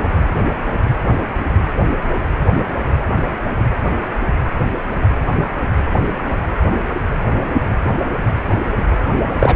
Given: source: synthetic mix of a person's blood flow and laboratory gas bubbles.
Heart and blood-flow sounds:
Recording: Doppler ultrasound of blood flow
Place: precordium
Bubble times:
9.39-9.56 s: bubbles
From the record:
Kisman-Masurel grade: 113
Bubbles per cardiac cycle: 1 to 2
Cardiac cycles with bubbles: 1 to 10%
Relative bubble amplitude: loud (0.450 to 0.775)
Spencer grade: 1 (occasional bubble signal discernible with the cardiac motion signal, with majority of cardiac periods free of bubbles)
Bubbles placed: anywhere in the cardiac cycle

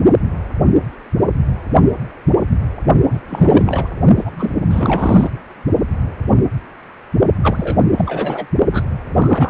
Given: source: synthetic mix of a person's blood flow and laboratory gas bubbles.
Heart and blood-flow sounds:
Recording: Doppler ultrasound of blood flow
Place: precordium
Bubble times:
3.10-3.19 s: bubbles
3.29-3.88 s: bubbles
4.17-4.53 s: bubbles
4.69-5.30 s: bubbles
7.42-7.78 s: bubbles
7.95-8.46 s: bubbles
8.71-8.82 s: bubbles
9.14-9.49 s: bubbles
From the record:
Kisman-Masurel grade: 333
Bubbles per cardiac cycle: rolling drumbeat, 9 or more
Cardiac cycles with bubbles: 50 to 99%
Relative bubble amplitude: loud (0.450 to 0.775)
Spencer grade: 3 (all of the cardiac periods contain showers or single bubble signals, but not dominating or overriding the cardiac motion signals)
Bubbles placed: only in the low amplitude regions of the cardiac cycle

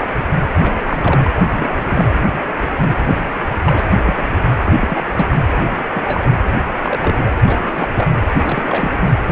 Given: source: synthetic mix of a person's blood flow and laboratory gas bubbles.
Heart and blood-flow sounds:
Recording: Doppler ultrasound of blood flow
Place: precordium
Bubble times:
0.00-0.08 s: bubbles
0.60-0.72 s: bubbles
0.85-1.34 s: bubbles
1.44-1.70 s: bubbles
1.75-2.21 s: bubbles
2.81-3.43 s: bubbles
3.65-3.97 s: bubbles
4.04-4.27 s: bubbles
4.32-4.39 s: bubbles
4.66-5.03 s: bubbles
5.15-5.26 s: bubbles
5.92-6.28 s: bubbles
6.82-7.33 s: bubbles
7.45-7.88 s: bubbles
7.96-8.08 s: bubbles
8.36-8.96 s: bubbles
From the record:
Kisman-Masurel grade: 242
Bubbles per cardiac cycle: several, 3 to 8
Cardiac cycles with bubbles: 100%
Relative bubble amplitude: moderate (0.250 to 0.450)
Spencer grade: 3 (all of the cardiac periods contain showers or single bubble signals, but not dominating or overriding the cardiac motion signals)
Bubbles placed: anywhere in the cardiac cycle

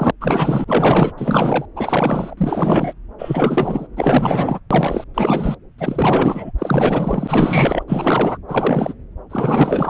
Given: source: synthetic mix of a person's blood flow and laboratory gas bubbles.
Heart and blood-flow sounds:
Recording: Doppler ultrasound of blood flow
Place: subclavian vein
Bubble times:
0.00-0.11 s: bubbles
0.20-0.65 s: bubbles
0.67-1.12 s: bubbles
1.18-1.66 s: bubbles
1.75-2.35 s: bubbles
2.37-2.94 s: bubbles
3.18-3.88 s: bubbles
3.97-4.60 s: bubbles
4.71-5.04 s: bubbles
5.14-5.57 s: bubbles
5.78-6.51 s: bubbles
6.58-7.83 s: bubbles
7.87-8.38 s: bubbles
8.47-8.94 s: bubbles
9.29-9.90 s: bubbles
From the record:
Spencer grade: 4 (maximum detectable bubble signal sounding continuously throughout systole and diastole of every cardiac period, and overriding the amplitude of the normal cardiac signals)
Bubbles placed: anywhere in the cardiac cycle

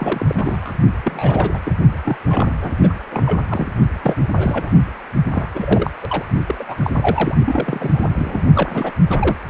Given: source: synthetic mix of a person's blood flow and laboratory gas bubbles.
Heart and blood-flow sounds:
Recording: Doppler ultrasound of blood flow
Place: precordium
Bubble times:
0.00-0.74 s: bubbles
1.04-1.50 s: bubbles
1.53-1.59 s: bubbles
1.64-1.73 s: bubbles
2.04-2.17 s: bubbles
2.27-2.53 s: bubbles
2.57-2.79 s: bubbles
2.83-2.94 s: bubbles
3.10-3.46 s: bubbles
3.50-3.67 s: bubbles
4.02-4.16 s: bubbles
4.37-4.77 s: bubbles
5.31-5.48 s: bubbles
5.55-5.91 s: bubbles
6.03-6.25 s: bubbles
6.47-6.55 s: bubbles
6.59-6.65 s: bubbles
6.68-7.35 s: bubbles
7.45-8.08 s: bubbles
8.15-8.43 s: bubbles
8.54-8.92 s: bubbles
9.10-9.36 s: bubbles
From the record:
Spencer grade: 3 (all of the cardiac periods contain showers or single bubble signals, but not dominating or overriding the cardiac motion signals)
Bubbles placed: only in the low amplitude regions of the cardiac cycle

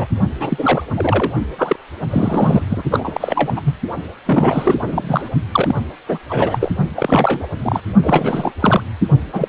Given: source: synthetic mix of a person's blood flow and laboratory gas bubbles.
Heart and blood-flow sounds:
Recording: Doppler ultrasound of blood flow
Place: precordium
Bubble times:
0.00-0.07 s: bubbles
0.40-0.83 s: bubbles
0.95-1.33 s: bubbles
1.58-1.76 s: bubbles
2.10-2.62 s: bubbles
2.69-2.83 s: bubbles
2.90-3.74 s: bubbles
4.25-4.75 s: bubbles
4.81-5.29 s: bubbles
5.52-5.75 s: bubbles
6.08-6.19 s: bubbles
6.29-6.71 s: bubbles
6.96-7.47 s: bubbles
7.62-7.80 s: bubbles
8.03-8.53 s: bubbles
8.61-8.81 s: bubbles
9.32-9.48 s: bubbles
From the record:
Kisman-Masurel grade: 343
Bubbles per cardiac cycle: rolling drumbeat, 9 or more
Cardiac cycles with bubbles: 100%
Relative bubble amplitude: loud (0.450 to 0.775)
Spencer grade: 3 (all of the cardiac periods contain showers or single bubble signals, but not dominating or overriding the cardiac motion signals)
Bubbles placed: only in the low amplitude regions of the cardiac cycle

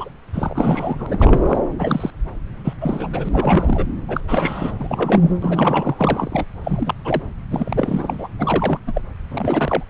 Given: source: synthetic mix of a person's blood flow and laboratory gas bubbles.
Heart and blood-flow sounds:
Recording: Doppler ultrasound of blood flow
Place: subclavian vein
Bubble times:
0.00-0.09 s: bubbles
0.33-1.57 s: bubbles
1.78-2.10 s: bubbles
2.64-2.73 s: bubbles
2.81-3.86 s: bubbles
4.08-4.21 s: bubbles
4.28-4.74 s: bubbles
4.79-5.33 s: bubbles
5.42-5.95 s: bubbles
5.98-6.46 s: bubbles
6.64-6.94 s: bubbles
7.05-7.22 s: bubbles
7.51-8.28 s: bubbles
8.39-8.79 s: bubbles
8.87-9.01 s: bubbles
9.31-9.83 s: bubbles
From the record:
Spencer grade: 3 (all of the cardiac periods contain showers or single bubble signals, but not dominating or overriding the cardiac motion signals)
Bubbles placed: anywhere in the cardiac cycle

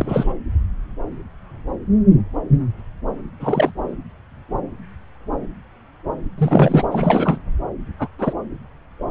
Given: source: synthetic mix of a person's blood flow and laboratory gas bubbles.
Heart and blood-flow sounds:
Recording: Doppler ultrasound of blood flow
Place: subclavian vein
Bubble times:
0.00-0.33 s: bubbles
3.40-3.73 s: bubbles
6.38-6.83 s: bubbles
6.91-7.38 s: bubbles
7.98-8.07 s: bubbles
8.18-8.33 s: bubbles
From the record:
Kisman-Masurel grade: 223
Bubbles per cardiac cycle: several, 3 to 8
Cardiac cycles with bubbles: 10 to 50%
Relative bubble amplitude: loud (0.450 to 0.775)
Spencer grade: 2 (many but less than half of the cardiac periods contain bubble signals, singularly or in groups)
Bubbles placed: anywhere in the cardiac cycle

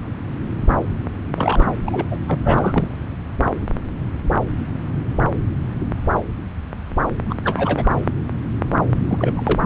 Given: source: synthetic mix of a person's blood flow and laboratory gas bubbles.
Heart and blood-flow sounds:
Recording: Doppler ultrasound of blood flow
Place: subclavian vein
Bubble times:
1.35-1.66 s: bubbles
1.85-2.06 s: bubbles
2.10-2.17 s: bubbles
2.27-2.38 s: bubbles
2.44-2.96 s: bubbles
7.29-7.35 s: bubbles
7.44-7.89 s: bubbles
8.93-9.60 s: bubbles
From the record:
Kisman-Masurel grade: 222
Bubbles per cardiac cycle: several, 3 to 8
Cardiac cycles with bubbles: 10 to 50%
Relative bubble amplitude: moderate (0.250 to 0.450)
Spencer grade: 2 (many but less than half of the cardiac periods contain bubble signals, singularly or in groups)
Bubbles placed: anywhere in the cardiac cycle

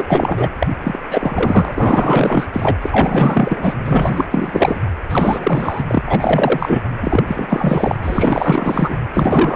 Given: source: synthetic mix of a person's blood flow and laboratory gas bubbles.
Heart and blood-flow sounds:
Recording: Doppler ultrasound of blood flow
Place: precordium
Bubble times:
0.00-0.50 s: bubbles
0.59-0.67 s: bubbles
0.83-0.99 s: bubbles
1.09-1.73 s: bubbles
1.76-2.49 s: bubbles
2.53-2.77 s: bubbles
2.82-3.77 s: bubbles
3.86-4.26 s: bubbles
4.31-4.79 s: bubbles
5.09-5.83 s: bubbles
5.87-6.03 s: bubbles
6.06-6.88 s: bubbles
7.02-7.23 s: bubbles
7.28-7.98 s: bubbles
8.03-8.99 s: bubbles
9.13-9.55 s: bubbles
From the record:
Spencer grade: 4 (maximum detectable bubble signal sounding continuously throughout systole and diastole of every cardiac period, and overriding the amplitude of the normal cardiac signals)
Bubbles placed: anywhere in the cardiac cycle

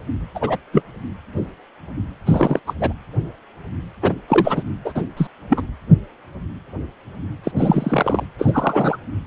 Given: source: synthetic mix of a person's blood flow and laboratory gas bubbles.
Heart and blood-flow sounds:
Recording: Doppler ultrasound of blood flow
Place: precordium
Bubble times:
0.35-0.57 s: bubbles
0.73-0.82 s: bubbles
2.26-2.60 s: bubbles
2.67-2.74 s: bubbles
2.80-2.93 s: bubbles
4.01-4.13 s: bubbles
4.28-4.63 s: bubbles
4.84-5.02 s: bubbles
5.17-5.27 s: bubbles
5.49-5.61 s: bubbles
7.43-7.51 s: bubbles
7.56-8.23 s: bubbles
8.38-8.97 s: bubbles
From the record:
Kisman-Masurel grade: 223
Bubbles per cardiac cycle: several, 3 to 8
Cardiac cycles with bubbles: 10 to 50%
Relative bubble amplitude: loud (0.450 to 0.775)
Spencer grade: 2 (many but less than half of the cardiac periods contain bubble signals, singularly or in groups)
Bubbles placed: anywhere in the cardiac cycle

